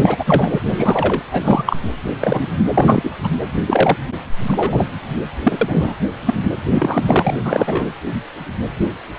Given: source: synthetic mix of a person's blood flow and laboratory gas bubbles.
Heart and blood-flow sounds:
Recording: Doppler ultrasound of blood flow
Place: precordium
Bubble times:
0.01-0.17 s: bubbles
0.19-0.60 s: bubbles
0.65-1.23 s: bubbles
1.31-1.64 s: bubbles
1.66-1.77 s: bubbles
1.96-2.48 s: bubbles
2.74-3.12 s: bubbles
3.23-3.29 s: bubbles
3.67-3.96 s: bubbles
4.47-4.86 s: bubbles
5.43-5.58 s: bubbles
5.61-5.94 s: bubbles
6.25-6.34 s: bubbles
6.69-7.02 s: bubbles
7.05-7.36 s: bubbles
7.44-7.85 s: bubbles
From the record:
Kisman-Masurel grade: 233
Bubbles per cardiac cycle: several, 3 to 8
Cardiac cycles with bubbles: 50 to 99%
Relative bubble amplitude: loud (0.450 to 0.775)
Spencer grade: 3 (all of the cardiac periods contain showers or single bubble signals, but not dominating or overriding the cardiac motion signals)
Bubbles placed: anywhere in the cardiac cycle

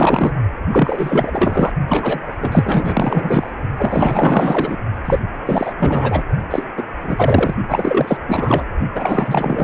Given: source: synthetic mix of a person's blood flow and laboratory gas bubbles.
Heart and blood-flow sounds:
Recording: Doppler ultrasound of blood flow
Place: precordium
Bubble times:
0.00-0.33 s: bubbles
0.72-1.72 s: bubbles
1.87-2.33 s: bubbles
2.39-3.51 s: bubbles
3.77-4.77 s: bubbles
5.05-5.19 s: bubbles
5.46-5.73 s: bubbles
5.77-6.23 s: bubbles
6.50-6.64 s: bubbles
6.77-6.83 s: bubbles
7.02-7.55 s: bubbles
7.68-8.17 s: bubbles
8.28-8.66 s: bubbles
8.95-9.64 s: bubbles
From the record:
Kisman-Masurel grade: 444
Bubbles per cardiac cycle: continuous sound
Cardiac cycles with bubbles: 100%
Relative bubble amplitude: maximal (0.775 to 0.999)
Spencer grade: 4 (maximum detectable bubble signal sounding continuously throughout systole and diastole of every cardiac period, and overriding the amplitude of the normal cardiac signals)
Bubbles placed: only in the low amplitude regions of the cardiac cycle

